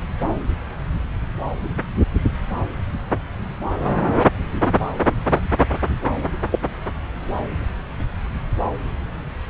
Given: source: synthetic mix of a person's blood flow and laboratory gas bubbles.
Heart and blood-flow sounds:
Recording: Doppler ultrasound of blood flow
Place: subclavian vein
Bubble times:
6.51-6.59 s: bubbles
From the record:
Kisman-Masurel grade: 112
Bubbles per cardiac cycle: 1 to 2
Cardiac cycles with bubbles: 1 to 10%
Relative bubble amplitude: moderate (0.250 to 0.450)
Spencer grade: 1 (occasional bubble signal discernible with the cardiac motion signal, with majority of cardiac periods free of bubbles)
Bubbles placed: anywhere in the cardiac cycle

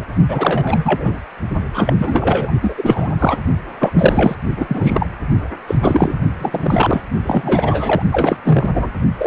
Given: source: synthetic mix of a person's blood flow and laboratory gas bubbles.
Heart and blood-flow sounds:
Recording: Doppler ultrasound of blood flow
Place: precordium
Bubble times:
0.00-0.05 s: bubbles
0.29-1.19 s: bubbles
1.74-2.51 s: bubbles
2.62-3.13 s: bubbles
3.18-3.41 s: bubbles
3.79-4.35 s: bubbles
4.57-4.65 s: bubbles
4.68-5.07 s: bubbles
5.67-5.75 s: bubbles
5.81-6.19 s: bubbles
6.39-7.02 s: bubbles
7.23-8.02 s: bubbles
8.12-8.37 s: bubbles
8.45-8.70 s: bubbles
8.74-8.89 s: bubbles
9.17-9.27 s: bubbles
From the record:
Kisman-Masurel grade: 343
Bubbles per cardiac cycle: rolling drumbeat, 9 or more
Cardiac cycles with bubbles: 100%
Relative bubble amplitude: loud (0.450 to 0.775)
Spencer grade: 3 (all of the cardiac periods contain showers or single bubble signals, but not dominating or overriding the cardiac motion signals)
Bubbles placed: only in the low amplitude regions of the cardiac cycle

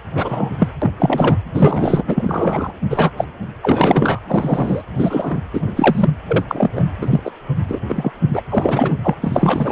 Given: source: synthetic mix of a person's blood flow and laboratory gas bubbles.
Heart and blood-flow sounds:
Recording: Doppler ultrasound of blood flow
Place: precordium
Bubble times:
0.14-0.52 s: bubbles
0.59-0.69 s: bubbles
0.81-0.92 s: bubbles
0.98-1.38 s: bubbles
1.53-2.03 s: bubbles
2.07-2.71 s: bubbles
2.90-3.10 s: bubbles
3.17-3.25 s: bubbles
3.62-4.19 s: bubbles
4.28-4.83 s: bubbles
4.98-5.40 s: bubbles
5.53-6.10 s: bubbles
6.27-6.45 s: bubbles
6.48-6.69 s: bubbles
6.76-6.85 s: bubbles
7.01-7.21 s: bubbles
7.24-7.31 s: bubbles
7.68-7.81 s: bubbles
7.89-8.11 s: bubbles
8.33-8.42 s: bubbles
8.50-8.94 s: bubbles
9.04-9.15 s: bubbles
9.21-9.72 s: bubbles
From the record:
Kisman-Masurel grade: 243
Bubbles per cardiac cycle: several, 3 to 8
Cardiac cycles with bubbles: 100%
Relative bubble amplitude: loud (0.450 to 0.775)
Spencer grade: 3 (all of the cardiac periods contain showers or single bubble signals, but not dominating or overriding the cardiac motion signals)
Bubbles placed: anywhere in the cardiac cycle

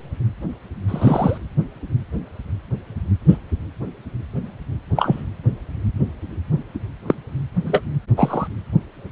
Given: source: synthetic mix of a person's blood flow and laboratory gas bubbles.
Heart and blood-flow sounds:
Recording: Doppler ultrasound of blood flow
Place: precordium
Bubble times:
0.88-1.38 s: bubbles
3.28-3.38 s: bubbles
4.96-5.23 s: bubbles
7.07-7.14 s: bubbles
7.65-7.80 s: bubbles
8.16-8.47 s: bubbles
From the record:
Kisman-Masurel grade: 123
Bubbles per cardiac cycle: 1 to 2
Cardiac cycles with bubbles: 10 to 50%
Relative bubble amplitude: loud (0.450 to 0.775)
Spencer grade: 2 (many but less than half of the cardiac periods contain bubble signals, singularly or in groups)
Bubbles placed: anywhere in the cardiac cycle

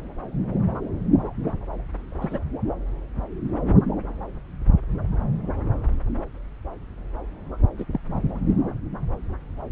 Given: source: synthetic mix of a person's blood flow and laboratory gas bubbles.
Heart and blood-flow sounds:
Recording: Doppler ultrasound of blood flow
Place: subclavian vein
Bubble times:
2.21-2.39 s: bubbles
7.78-7.85 s: bubbles
7.92-8.00 s: bubbles
From the record:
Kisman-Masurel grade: 122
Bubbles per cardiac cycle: 1 to 2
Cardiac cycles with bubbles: 10 to 50%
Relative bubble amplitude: moderate (0.250 to 0.450)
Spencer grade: 2 (many but less than half of the cardiac periods contain bubble signals, singularly or in groups)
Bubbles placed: anywhere in the cardiac cycle

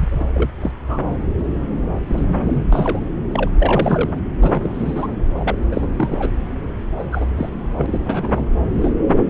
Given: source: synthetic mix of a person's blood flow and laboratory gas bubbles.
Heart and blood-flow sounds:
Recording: Doppler ultrasound of blood flow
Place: subclavian vein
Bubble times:
0.00-0.07 s: bubbles
0.10-0.49 s: bubbles
0.52-0.72 s: bubbles
0.84-1.09 s: bubbles
2.08-2.65 s: bubbles
2.72-3.00 s: bubbles
3.33-3.50 s: bubbles
3.59-4.12 s: bubbles
4.41-5.08 s: bubbles
5.38-5.58 s: bubbles
5.71-5.87 s: bubbles
5.96-6.32 s: bubbles
6.98-7.04 s: bubbles
7.12-7.26 s: bubbles
7.37-7.50 s: bubbles
7.77-8.45 s: bubbles
8.81-8.93 s: bubbles
9.07-9.20 s: bubbles
From the record:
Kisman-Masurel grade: 242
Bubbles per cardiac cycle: several, 3 to 8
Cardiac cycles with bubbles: 100%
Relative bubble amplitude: moderate (0.250 to 0.450)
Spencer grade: 3 (all of the cardiac periods contain showers or single bubble signals, but not dominating or overriding the cardiac motion signals)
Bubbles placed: anywhere in the cardiac cycle

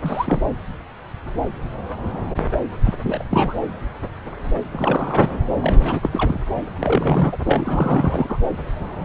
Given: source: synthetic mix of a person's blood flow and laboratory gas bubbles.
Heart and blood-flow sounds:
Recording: Doppler ultrasound of blood flow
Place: subclavian vein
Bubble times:
0.03-0.41 s: bubbles
2.84-2.96 s: bubbles
3.04-3.23 s: bubbles
3.30-3.54 s: bubbles
4.72-5.37 s: bubbles
5.62-6.00 s: bubbles
6.02-6.41 s: bubbles
6.55-6.62 s: bubbles
6.80-7.38 s: bubbles
7.46-8.37 s: bubbles
From the record:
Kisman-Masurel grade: 332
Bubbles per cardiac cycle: rolling drumbeat, 9 or more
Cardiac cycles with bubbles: 50 to 99%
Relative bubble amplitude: moderate (0.250 to 0.450)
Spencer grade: 3 (all of the cardiac periods contain showers or single bubble signals, but not dominating or overriding the cardiac motion signals)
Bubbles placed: anywhere in the cardiac cycle

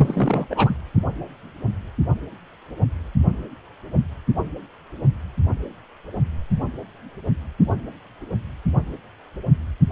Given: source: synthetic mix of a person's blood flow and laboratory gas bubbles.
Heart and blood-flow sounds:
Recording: Doppler ultrasound of blood flow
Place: precordium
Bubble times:
0.00-0.47 s: bubbles
0.50-0.75 s: bubbles
From the record:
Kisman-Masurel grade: 222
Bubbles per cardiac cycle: several, 3 to 8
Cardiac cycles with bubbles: 10 to 50%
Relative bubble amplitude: moderate (0.250 to 0.450)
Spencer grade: 2 (many but less than half of the cardiac periods contain bubble signals, singularly or in groups)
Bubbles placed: only in the low amplitude regions of the cardiac cycle

